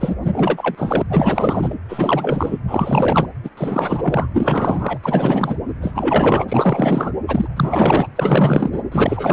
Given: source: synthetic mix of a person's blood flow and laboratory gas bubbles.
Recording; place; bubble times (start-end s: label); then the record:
Doppler ultrasound of blood flow; precordium
0.00-0.15 s: bubbles
0.21-1.02 s: bubbles
1.09-1.76 s: bubbles
1.89-2.59 s: bubbles
2.67-3.26 s: bubbles
3.43-3.49 s: bubbles
3.57-4.29 s: bubbles
4.33-4.99 s: bubbles
5.02-5.56 s: bubbles
5.81-6.45 s: bubbles
6.48-7.13 s: bubbles
7.27-7.47 s: bubbles
7.56-8.08 s: bubbles
8.16-8.83 s: bubbles
8.92-9.33 s: bubbles
From the record:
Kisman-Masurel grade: 444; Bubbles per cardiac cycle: continuous sound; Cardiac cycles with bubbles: 100%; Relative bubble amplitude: maximal (0.775 to 0.999); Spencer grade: 4 (maximum detectable bubble signal sounding continuously throughout systole and diastole of every cardiac period, and overriding the amplitude of the normal cardiac signals); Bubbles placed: anywhere in the cardiac cycle